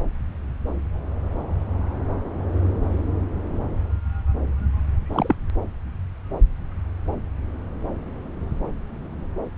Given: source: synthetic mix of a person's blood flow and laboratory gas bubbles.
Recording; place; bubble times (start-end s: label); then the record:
Doppler ultrasound of blood flow; subclavian vein
5.10-5.35 s: bubbles
From the record:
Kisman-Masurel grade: 112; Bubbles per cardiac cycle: 1 to 2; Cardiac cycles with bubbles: 1 to 10%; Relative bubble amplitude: moderate (0.250 to 0.450); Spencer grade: 1 (occasional bubble signal discernible with the cardiac motion signal, with majority of cardiac periods free of bubbles); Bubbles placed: anywhere in the cardiac cycle